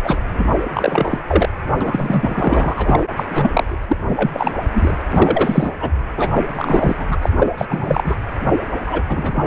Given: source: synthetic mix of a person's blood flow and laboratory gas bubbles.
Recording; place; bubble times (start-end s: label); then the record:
Doppler ultrasound of blood flow; precordium
0.04-0.17 s: bubbles
0.28-0.46 s: bubbles
0.73-1.20 s: bubbles
1.27-1.49 s: bubbles
1.80-3.12 s: bubbles
3.17-3.25 s: bubbles
3.31-3.77 s: bubbles
3.88-3.98 s: bubbles
4.08-4.31 s: bubbles
4.33-4.52 s: bubbles
4.75-4.98 s: bubbles
5.10-5.73 s: bubbles
5.80-5.91 s: bubbles
6.18-6.31 s: bubbles
6.34-6.48 s: bubbles
6.55-6.96 s: bubbles
6.98-7.17 s: bubbles
7.22-7.30 s: bubbles
7.39-7.47 s: bubbles
7.58-7.66 s: bubbles
7.69-8.18 s: bubbles
8.87-9.02 s: bubbles
9.08-9.47 s: bubbles
From the record:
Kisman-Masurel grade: 343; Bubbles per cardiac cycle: rolling drumbeat, 9 or more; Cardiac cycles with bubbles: 100%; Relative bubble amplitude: loud (0.450 to 0.775); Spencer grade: 3 (all of the cardiac periods contain showers or single bubble signals, but not dominating or overriding the cardiac motion signals); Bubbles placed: anywhere in the cardiac cycle